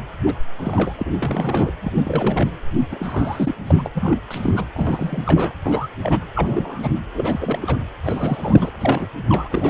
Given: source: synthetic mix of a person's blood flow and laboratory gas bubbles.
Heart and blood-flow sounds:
Doppler ultrasound of blood flow; precordium
0.26-0.33 s: bubbles
0.57-0.94 s: bubbles
0.98-1.71 s: bubbles
1.83-2.50 s: bubbles
2.91-3.54 s: bubbles
3.67-3.75 s: bubbles
3.77-3.87 s: bubbles
3.94-4.18 s: bubbles
4.30-4.66 s: bubbles
4.74-5.23 s: bubbles
5.26-5.53 s: bubbles
5.63-5.88 s: bubbles
6.03-6.24 s: bubbles
6.35-7.01 s: bubbles
7.14-7.77 s: bubbles
8.04-8.71 s: bubbles
8.80-9.08 s: bubbles
9.29-9.70 s: bubbles
From the record:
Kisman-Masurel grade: 332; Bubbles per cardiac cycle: rolling drumbeat, 9 or more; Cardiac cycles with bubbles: 50 to 99%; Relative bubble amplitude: moderate (0.250 to 0.450); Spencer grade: 3 (all of the cardiac periods contain showers or single bubble signals, but not dominating or overriding the cardiac motion signals); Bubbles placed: anywhere in the cardiac cycle

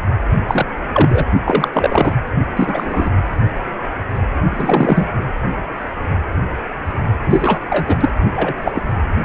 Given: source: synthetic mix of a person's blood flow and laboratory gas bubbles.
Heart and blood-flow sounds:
Doppler ultrasound of blood flow; precordium
0.48-0.66 s: bubbles
0.93-1.25 s: bubbles
1.44-1.68 s: bubbles
1.73-2.16 s: bubbles
2.56-3.10 s: bubbles
4.50-5.07 s: bubbles
7.25-7.60 s: bubbles
7.70-7.97 s: bubbles
8.00-8.10 s: bubbles
8.36-8.54 s: bubbles
8.62-8.72 s: bubbles
8.74-8.82 s: bubbles
From the record:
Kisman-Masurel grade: 233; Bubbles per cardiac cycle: several, 3 to 8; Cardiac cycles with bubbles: 50 to 99%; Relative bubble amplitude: loud (0.450 to 0.775); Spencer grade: 3 (all of the cardiac periods contain showers or single bubble signals, but not dominating or overriding the cardiac motion signals); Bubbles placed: only in the low amplitude regions of the cardiac cycle

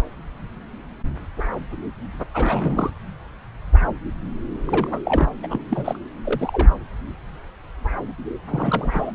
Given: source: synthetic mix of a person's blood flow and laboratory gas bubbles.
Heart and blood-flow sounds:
Doppler ultrasound of blood flow; subclavian vein
2.34-2.91 s: bubbles
4.67-5.00 s: bubbles
5.05-5.28 s: bubbles
5.42-5.63 s: bubbles
5.68-5.99 s: bubbles
6.24-6.69 s: bubbles
8.50-9.12 s: bubbles
From the record:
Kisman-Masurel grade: 222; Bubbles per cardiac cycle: several, 3 to 8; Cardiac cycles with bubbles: 10 to 50%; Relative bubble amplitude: moderate (0.250 to 0.450); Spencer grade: 2 (many but less than half of the cardiac periods contain bubble signals, singularly or in groups); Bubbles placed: anywhere in the cardiac cycle

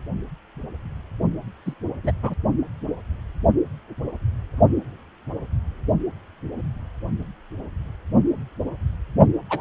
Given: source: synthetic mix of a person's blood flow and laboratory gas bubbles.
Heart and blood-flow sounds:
Doppler ultrasound of blood flow; precordium
1.66-1.74 s: bubbles
2.03-2.12 s: bubbles
2.23-2.34 s: bubbles
9.49-9.61 s: bubbles
From the record:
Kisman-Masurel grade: 222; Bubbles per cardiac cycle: several, 3 to 8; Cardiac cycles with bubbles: 10 to 50%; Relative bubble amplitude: moderate (0.250 to 0.450); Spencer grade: 2 (many but less than half of the cardiac periods contain bubble signals, singularly or in groups); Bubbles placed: only in the low amplitude regions of the cardiac cycle

